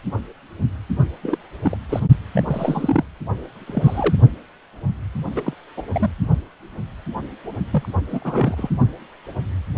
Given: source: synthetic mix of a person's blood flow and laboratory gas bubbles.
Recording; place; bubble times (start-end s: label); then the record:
Doppler ultrasound of blood flow; precordium
1.23-1.38 s: bubbles
1.63-1.77 s: bubbles
1.89-2.00 s: bubbles
2.32-3.04 s: bubbles
3.67-4.15 s: bubbles
5.35-5.42 s: bubbles
5.45-5.54 s: bubbles
5.77-5.83 s: bubbles
5.93-6.09 s: bubbles
7.71-7.88 s: bubbles
8.08-8.70 s: bubbles
From the record:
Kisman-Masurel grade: 232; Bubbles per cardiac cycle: several, 3 to 8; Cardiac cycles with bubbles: 50 to 99%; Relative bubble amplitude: moderate (0.250 to 0.450); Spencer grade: 3 (all of the cardiac periods contain showers or single bubble signals, but not dominating or overriding the cardiac motion signals); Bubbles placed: only in the low amplitude regions of the cardiac cycle